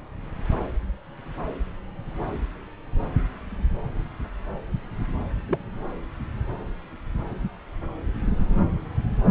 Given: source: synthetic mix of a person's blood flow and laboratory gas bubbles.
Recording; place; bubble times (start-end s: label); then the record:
Doppler ultrasound of blood flow; subclavian vein
5.49-5.58 s: bubbles
From the record:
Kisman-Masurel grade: 121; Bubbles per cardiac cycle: 1 to 2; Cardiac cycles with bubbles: 10 to 50%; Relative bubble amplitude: barely perceptible (0.100 to 0.250); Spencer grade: 2 (many but less than half of the cardiac periods contain bubble signals, singularly or in groups); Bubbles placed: anywhere in the cardiac cycle